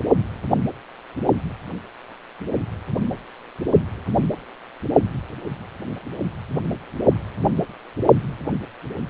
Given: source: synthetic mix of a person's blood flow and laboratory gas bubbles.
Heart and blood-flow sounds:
Doppler ultrasound of blood flow; precordium
no bubbles
From the record:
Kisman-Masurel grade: 000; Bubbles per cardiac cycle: 0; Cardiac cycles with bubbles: 0%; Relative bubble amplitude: no bubbles discernible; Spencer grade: 0 (complete lack of bubble signals)

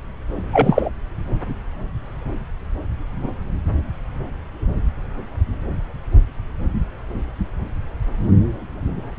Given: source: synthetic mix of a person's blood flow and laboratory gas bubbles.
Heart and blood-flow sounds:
Doppler ultrasound of blood flow; subclavian vein
0.52-0.90 s: bubbles
From the record:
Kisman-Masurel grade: 213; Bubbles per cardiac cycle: several, 3 to 8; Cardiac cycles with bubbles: 1 to 10%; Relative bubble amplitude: loud (0.450 to 0.775); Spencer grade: 1 (occasional bubble signal discernible with the cardiac motion signal, with majority of cardiac periods free of bubbles); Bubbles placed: anywhere in the cardiac cycle

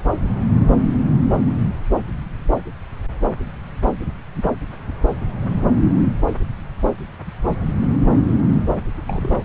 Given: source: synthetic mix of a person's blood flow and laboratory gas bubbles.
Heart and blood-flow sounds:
Doppler ultrasound of blood flow; subclavian vein
8.96-9.01 s: bubbles
9.07-9.43 s: bubbles
From the record:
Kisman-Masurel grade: 211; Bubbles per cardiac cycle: several, 3 to 8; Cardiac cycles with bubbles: 1 to 10%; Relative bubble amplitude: barely perceptible (0.100 to 0.250); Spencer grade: 1 (occasional bubble signal discernible with the cardiac motion signal, with majority of cardiac periods free of bubbles); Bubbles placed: anywhere in the cardiac cycle

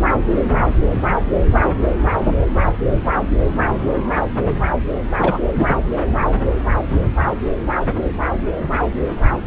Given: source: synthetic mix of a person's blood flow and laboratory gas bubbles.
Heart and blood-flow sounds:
Doppler ultrasound of blood flow; subclavian vein
5.18-5.38 s: bubbles
5.55-5.76 s: bubbles
From the record:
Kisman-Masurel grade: 213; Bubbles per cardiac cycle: several, 3 to 8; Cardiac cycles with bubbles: 1 to 10%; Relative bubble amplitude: loud (0.450 to 0.775); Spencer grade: 1 (occasional bubble signal discernible with the cardiac motion signal, with majority of cardiac periods free of bubbles); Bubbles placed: anywhere in the cardiac cycle

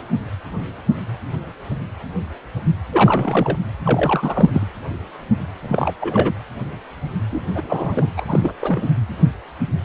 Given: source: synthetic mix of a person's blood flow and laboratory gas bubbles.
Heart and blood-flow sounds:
Doppler ultrasound of blood flow; precordium
2.92-3.58 s: bubbles
3.84-4.67 s: bubbles
5.61-5.92 s: bubbles
6.00-6.33 s: bubbles
7.30-7.41 s: bubbles
7.55-8.12 s: bubbles
8.16-8.53 s: bubbles
8.61-8.96 s: bubbles
From the record:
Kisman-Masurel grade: 332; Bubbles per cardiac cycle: rolling drumbeat, 9 or more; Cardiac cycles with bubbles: 50 to 99%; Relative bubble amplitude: moderate (0.250 to 0.450); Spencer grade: 3 (all of the cardiac periods contain showers or single bubble signals, but not dominating or overriding the cardiac motion signals); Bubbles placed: anywhere in the cardiac cycle

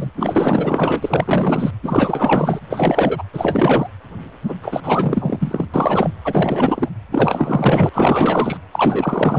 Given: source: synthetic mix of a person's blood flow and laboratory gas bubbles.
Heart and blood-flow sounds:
Doppler ultrasound of blood flow; precordium
0.00-0.10 s: bubbles
0.15-1.71 s: bubbles
1.82-2.59 s: bubbles
2.70-3.24 s: bubbles
3.33-3.89 s: bubbles
4.47-4.54 s: bubbles
4.62-4.80 s: bubbles
4.83-5.67 s: bubbles
5.73-6.10 s: bubbles
6.25-6.90 s: bubbles
7.11-8.57 s: bubbles
8.71-9.39 s: bubbles
From the record:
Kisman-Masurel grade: 444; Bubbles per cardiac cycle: continuous sound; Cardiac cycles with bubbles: 100%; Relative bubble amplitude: maximal (0.775 to 0.999); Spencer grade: 4 (maximum detectable bubble signal sounding continuously throughout systole and diastole of every cardiac period, and overriding the amplitude of the normal cardiac signals); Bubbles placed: anywhere in the cardiac cycle

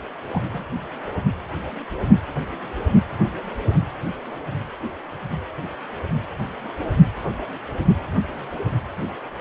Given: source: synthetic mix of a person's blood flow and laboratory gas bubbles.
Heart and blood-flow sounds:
Doppler ultrasound of blood flow; precordium
0.29-0.40 s: bubbles
0.53-0.64 s: bubbles
From the record:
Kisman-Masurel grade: 211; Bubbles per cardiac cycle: several, 3 to 8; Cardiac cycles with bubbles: 1 to 10%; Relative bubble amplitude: barely perceptible (0.100 to 0.250); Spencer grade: 1 (occasional bubble signal discernible with the cardiac motion signal, with majority of cardiac periods free of bubbles); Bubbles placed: anywhere in the cardiac cycle

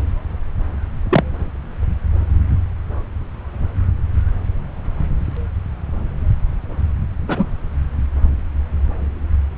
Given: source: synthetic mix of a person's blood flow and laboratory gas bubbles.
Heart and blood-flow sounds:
Doppler ultrasound of blood flow; subclavian vein
1.11-1.23 s: bubbles
7.27-7.46 s: bubbles
From the record:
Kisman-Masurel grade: 123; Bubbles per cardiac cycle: 1 to 2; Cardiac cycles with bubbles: 10 to 50%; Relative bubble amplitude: loud (0.450 to 0.775); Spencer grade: 2 (many but less than half of the cardiac periods contain bubble signals, singularly or in groups); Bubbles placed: anywhere in the cardiac cycle

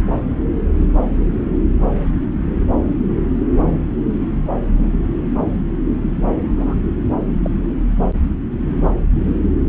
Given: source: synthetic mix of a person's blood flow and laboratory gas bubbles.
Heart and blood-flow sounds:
Doppler ultrasound of blood flow; subclavian vein
6.57-6.74 s: bubbles
7.44-7.50 s: bubbles
From the record:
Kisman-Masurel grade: 111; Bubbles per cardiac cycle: 1 to 2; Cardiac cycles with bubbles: 1 to 10%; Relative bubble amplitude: barely perceptible (0.100 to 0.250); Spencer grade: 1 (occasional bubble signal discernible with the cardiac motion signal, with majority of cardiac periods free of bubbles); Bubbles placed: anywhere in the cardiac cycle

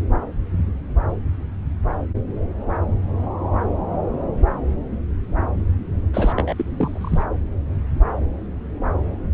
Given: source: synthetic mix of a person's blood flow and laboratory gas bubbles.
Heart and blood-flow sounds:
Doppler ultrasound of blood flow; subclavian vein
6.13-6.33 s: bubbles
6.36-7.23 s: bubbles
From the record:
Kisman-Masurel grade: 222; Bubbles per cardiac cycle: several, 3 to 8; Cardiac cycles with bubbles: 10 to 50%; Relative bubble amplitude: moderate (0.250 to 0.450); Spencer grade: 2 (many but less than half of the cardiac periods contain bubble signals, singularly or in groups); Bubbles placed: anywhere in the cardiac cycle

